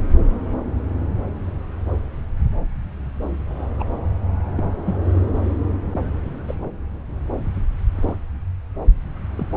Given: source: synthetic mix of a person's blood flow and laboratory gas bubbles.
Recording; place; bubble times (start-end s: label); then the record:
Doppler ultrasound of blood flow; subclavian vein
3.55-3.67 s: bubbles
3.79-3.84 s: bubbles
4.57-4.70 s: bubbles
4.86-4.96 s: bubbles
5.92-6.02 s: bubbles
6.48-6.55 s: bubbles
7.95-8.15 s: bubbles
9.38-9.46 s: bubbles
From the record:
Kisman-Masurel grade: 121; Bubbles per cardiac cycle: 1 to 2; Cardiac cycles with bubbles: 10 to 50%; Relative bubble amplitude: barely perceptible (0.100 to 0.250); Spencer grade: 2 (many but less than half of the cardiac periods contain bubble signals, singularly or in groups); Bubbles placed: anywhere in the cardiac cycle